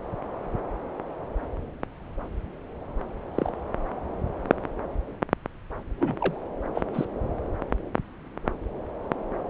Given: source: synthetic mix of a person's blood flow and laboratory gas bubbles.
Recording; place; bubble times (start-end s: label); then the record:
Doppler ultrasound of blood flow; subclavian vein
3.36-3.51 s: bubbles
6.00-6.39 s: bubbles
6.75-6.81 s: bubbles
6.93-7.05 s: bubbles
From the record:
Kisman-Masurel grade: 121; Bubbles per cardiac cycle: 1 to 2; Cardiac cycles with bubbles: 10 to 50%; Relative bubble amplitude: barely perceptible (0.100 to 0.250); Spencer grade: 2 (many but less than half of the cardiac periods contain bubble signals, singularly or in groups); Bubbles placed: anywhere in the cardiac cycle